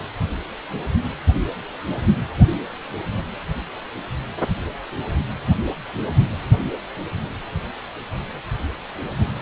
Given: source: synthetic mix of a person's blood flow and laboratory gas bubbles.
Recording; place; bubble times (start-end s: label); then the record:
Doppler ultrasound of blood flow; precordium
no bubbles
From the record:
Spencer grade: 0 (complete lack of bubble signals)